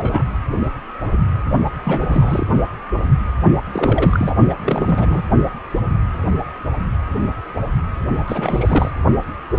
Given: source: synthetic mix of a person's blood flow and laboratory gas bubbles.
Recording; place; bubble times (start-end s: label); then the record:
Doppler ultrasound of blood flow; precordium
0.00-0.23 s: bubbles
1.81-2.08 s: bubbles
2.10-2.47 s: bubbles
3.56-3.61 s: bubbles
3.72-4.34 s: bubbles
4.49-4.54 s: bubbles
4.60-5.21 s: bubbles
8.27-8.91 s: bubbles
From the record:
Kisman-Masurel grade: 332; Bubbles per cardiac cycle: rolling drumbeat, 9 or more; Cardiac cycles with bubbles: 50 to 99%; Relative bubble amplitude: moderate (0.250 to 0.450); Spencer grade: 3 (all of the cardiac periods contain showers or single bubble signals, but not dominating or overriding the cardiac motion signals); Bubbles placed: only in the low amplitude regions of the cardiac cycle